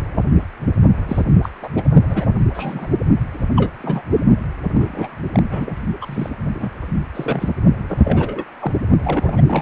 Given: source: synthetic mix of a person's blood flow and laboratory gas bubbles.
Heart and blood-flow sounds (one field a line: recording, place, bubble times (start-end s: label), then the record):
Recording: Doppler ultrasound of blood flow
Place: precordium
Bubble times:
1.08-1.22 s: bubbles
1.42-1.49 s: bubbles
1.61-1.69 s: bubbles
1.75-1.83 s: bubbles
2.09-2.26 s: bubbles
2.39-2.44 s: bubbles
2.54-2.88 s: bubbles
3.56-3.71 s: bubbles
3.81-4.02 s: bubbles
4.73-5.17 s: bubbles
5.33-5.82 s: bubbles
6.01-6.29 s: bubbles
6.54-6.70 s: bubbles
7.15-7.50 s: bubbles
7.89-7.97 s: bubbles
8.04-8.44 s: bubbles
8.59-8.72 s: bubbles
9.02-9.41 s: bubbles
9.46-9.62 s: bubbles
From the record:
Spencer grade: 3 (all of the cardiac periods contain showers or single bubble signals, but not dominating or overriding the cardiac motion signals)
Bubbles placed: only in the low amplitude regions of the cardiac cycle